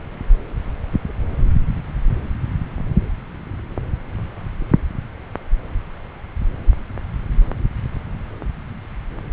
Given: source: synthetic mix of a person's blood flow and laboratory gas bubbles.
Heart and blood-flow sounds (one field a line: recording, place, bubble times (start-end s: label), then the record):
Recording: Doppler ultrasound of blood flow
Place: subclavian vein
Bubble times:
1.07-1.13 s: bubbles
From the record:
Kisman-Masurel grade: 111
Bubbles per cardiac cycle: 1 to 2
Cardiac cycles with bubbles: 1 to 10%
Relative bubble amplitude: barely perceptible (0.100 to 0.250)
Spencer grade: 1 (occasional bubble signal discernible with the cardiac motion signal, with majority of cardiac periods free of bubbles)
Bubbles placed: anywhere in the cardiac cycle